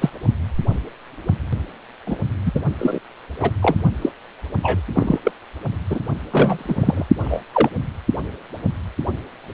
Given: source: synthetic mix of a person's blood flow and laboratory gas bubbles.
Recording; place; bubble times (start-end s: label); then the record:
Doppler ultrasound of blood flow; precordium
0.01-0.09 s: bubbles
2.06-2.18 s: bubbles
2.46-2.52 s: bubbles
2.55-2.60 s: bubbles
2.79-2.99 s: bubbles
3.40-3.50 s: bubbles
3.62-3.77 s: bubbles
4.01-4.10 s: bubbles
4.62-4.80 s: bubbles
4.94-5.20 s: bubbles
5.23-5.31 s: bubbles
5.90-5.99 s: bubbles
6.31-7.06 s: bubbles
7.23-7.41 s: bubbles
7.53-7.69 s: bubbles
From the record:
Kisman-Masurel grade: 233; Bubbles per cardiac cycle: several, 3 to 8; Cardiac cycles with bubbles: 50 to 99%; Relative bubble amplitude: loud (0.450 to 0.775); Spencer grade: 3 (all of the cardiac periods contain showers or single bubble signals, but not dominating or overriding the cardiac motion signals); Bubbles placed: only in the low amplitude regions of the cardiac cycle